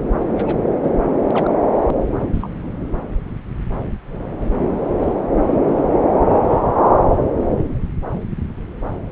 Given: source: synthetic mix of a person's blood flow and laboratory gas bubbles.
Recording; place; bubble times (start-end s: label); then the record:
Doppler ultrasound of blood flow; subclavian vein
0.31-0.60 s: bubbles
0.82-0.90 s: bubbles
1.31-1.56 s: bubbles
2.33-2.49 s: bubbles
5.62-5.88 s: bubbles
From the record:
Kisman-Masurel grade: 121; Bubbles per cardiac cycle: 1 to 2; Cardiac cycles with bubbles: 10 to 50%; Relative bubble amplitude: barely perceptible (0.100 to 0.250); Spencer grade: 2 (many but less than half of the cardiac periods contain bubble signals, singularly or in groups); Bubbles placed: anywhere in the cardiac cycle